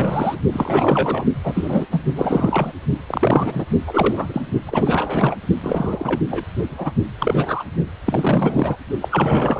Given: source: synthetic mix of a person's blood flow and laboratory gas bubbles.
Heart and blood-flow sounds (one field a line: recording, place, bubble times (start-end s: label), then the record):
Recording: Doppler ultrasound of blood flow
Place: precordium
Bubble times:
0.00-0.39 s: bubbles
0.52-1.24 s: bubbles
1.44-1.87 s: bubbles
1.91-2.02 s: bubbles
2.16-2.72 s: bubbles
3.06-3.65 s: bubbles
3.86-4.42 s: bubbles
4.66-5.36 s: bubbles
5.60-6.21 s: bubbles
6.30-6.44 s: bubbles
6.63-6.92 s: bubbles
7.19-7.64 s: bubbles
8.06-8.76 s: bubbles
9.02-9.60 s: bubbles
From the record:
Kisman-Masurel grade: 342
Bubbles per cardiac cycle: rolling drumbeat, 9 or more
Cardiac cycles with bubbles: 100%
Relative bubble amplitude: moderate (0.250 to 0.450)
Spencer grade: 3 (all of the cardiac periods contain showers or single bubble signals, but not dominating or overriding the cardiac motion signals)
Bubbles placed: only in the low amplitude regions of the cardiac cycle